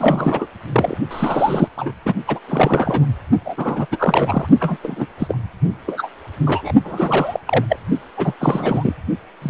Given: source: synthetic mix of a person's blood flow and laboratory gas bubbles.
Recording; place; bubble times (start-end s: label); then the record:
Doppler ultrasound of blood flow; precordium
0.00-0.46 s: bubbles
0.72-0.97 s: bubbles
1.10-1.68 s: bubbles
1.77-1.92 s: bubbles
2.05-2.14 s: bubbles
2.27-2.39 s: bubbles
2.48-3.06 s: bubbles
3.45-3.86 s: bubbles
3.91-4.47 s: bubbles
4.60-4.77 s: bubbles
4.83-5.05 s: bubbles
5.19-5.37 s: bubbles
5.87-6.08 s: bubbles
6.46-6.72 s: bubbles
6.83-7.40 s: bubbles
7.46-7.65 s: bubbles
7.69-7.77 s: bubbles
8.17-8.33 s: bubbles
8.39-8.93 s: bubbles
9.42-9.50 s: bubbles
From the record:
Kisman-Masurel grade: 342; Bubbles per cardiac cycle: rolling drumbeat, 9 or more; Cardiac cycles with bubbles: 100%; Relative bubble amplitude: moderate (0.250 to 0.450); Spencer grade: 3 (all of the cardiac periods contain showers or single bubble signals, but not dominating or overriding the cardiac motion signals); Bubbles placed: only in the low amplitude regions of the cardiac cycle